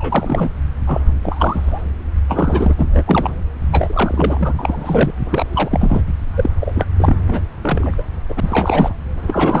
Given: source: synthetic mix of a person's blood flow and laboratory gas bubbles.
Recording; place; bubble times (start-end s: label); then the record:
Doppler ultrasound of blood flow; subclavian vein
0.00-0.50 s: bubbles
0.87-1.00 s: bubbles
1.23-1.82 s: bubbles
2.28-2.74 s: bubbles
2.78-3.36 s: bubbles
3.72-4.53 s: bubbles
4.58-5.12 s: bubbles
5.29-6.02 s: bubbles
6.37-6.50 s: bubbles
6.61-6.86 s: bubbles
6.96-7.41 s: bubbles
7.62-7.94 s: bubbles
7.98-8.03 s: bubbles
8.29-8.95 s: bubbles
9.28-9.60 s: bubbles
From the record:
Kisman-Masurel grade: 342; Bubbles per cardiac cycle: rolling drumbeat, 9 or more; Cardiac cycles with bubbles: 100%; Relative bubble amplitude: moderate (0.250 to 0.450); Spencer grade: 3 (all of the cardiac periods contain showers or single bubble signals, but not dominating or overriding the cardiac motion signals); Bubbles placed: anywhere in the cardiac cycle